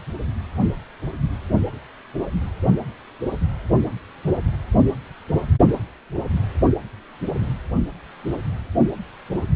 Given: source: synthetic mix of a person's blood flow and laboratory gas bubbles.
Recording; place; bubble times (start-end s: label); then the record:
Doppler ultrasound of blood flow; precordium
no bubbles
From the record:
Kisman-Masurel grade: 000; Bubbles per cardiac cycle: 0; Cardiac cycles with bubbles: 0%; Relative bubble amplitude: no bubbles discernible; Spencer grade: 0 (complete lack of bubble signals)